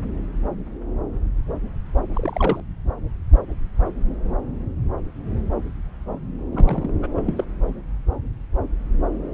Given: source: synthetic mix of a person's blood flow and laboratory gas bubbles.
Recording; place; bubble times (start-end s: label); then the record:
Doppler ultrasound of blood flow; subclavian vein
2.13-2.60 s: bubbles
6.51-6.93 s: bubbles
7.01-7.06 s: bubbles
7.15-7.44 s: bubbles
From the record:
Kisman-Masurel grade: 221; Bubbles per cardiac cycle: several, 3 to 8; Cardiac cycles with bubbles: 10 to 50%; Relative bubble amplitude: barely perceptible (0.100 to 0.250); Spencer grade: 2 (many but less than half of the cardiac periods contain bubble signals, singularly or in groups); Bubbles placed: anywhere in the cardiac cycle